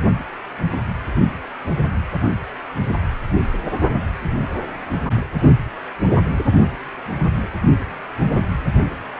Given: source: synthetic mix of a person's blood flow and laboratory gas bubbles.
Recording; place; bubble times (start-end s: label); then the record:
Doppler ultrasound of blood flow; precordium
no bubbles
From the record:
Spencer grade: 0 (complete lack of bubble signals)